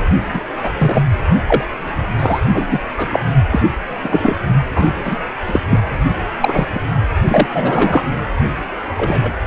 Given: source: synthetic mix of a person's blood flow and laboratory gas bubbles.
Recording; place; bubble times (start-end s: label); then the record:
Doppler ultrasound of blood flow; precordium
0.00-0.05 s: bubbles
0.33-0.41 s: bubbles
0.64-0.70 s: bubbles
0.79-1.02 s: bubbles
1.47-1.65 s: bubbles
2.19-2.42 s: bubbles
2.49-2.80 s: bubbles
2.97-3.20 s: bubbles
3.50-3.60 s: bubbles
4.03-4.36 s: bubbles
4.75-4.86 s: bubbles
5.04-5.18 s: bubbles
5.46-5.60 s: bubbles
5.69-5.79 s: bubbles
6.40-6.67 s: bubbles
6.73-6.80 s: bubbles
7.28-7.46 s: bubbles
7.50-8.04 s: bubbles
8.97-9.33 s: bubbles
From the record:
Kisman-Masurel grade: 243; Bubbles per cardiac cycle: several, 3 to 8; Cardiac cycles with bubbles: 100%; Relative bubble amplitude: loud (0.450 to 0.775); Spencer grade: 3 (all of the cardiac periods contain showers or single bubble signals, but not dominating or overriding the cardiac motion signals); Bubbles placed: only in the low amplitude regions of the cardiac cycle